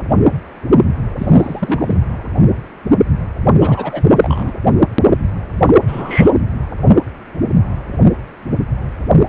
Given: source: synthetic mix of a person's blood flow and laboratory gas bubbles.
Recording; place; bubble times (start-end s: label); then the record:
Doppler ultrasound of blood flow; precordium
1.18-1.99 s: bubbles
3.61-4.04 s: bubbles
4.16-4.52 s: bubbles
5.66-5.73 s: bubbles
5.76-6.31 s: bubbles
From the record:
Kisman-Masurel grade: 222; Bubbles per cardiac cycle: several, 3 to 8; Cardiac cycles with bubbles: 10 to 50%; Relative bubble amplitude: moderate (0.250 to 0.450); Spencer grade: 2 (many but less than half of the cardiac periods contain bubble signals, singularly or in groups); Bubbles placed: anywhere in the cardiac cycle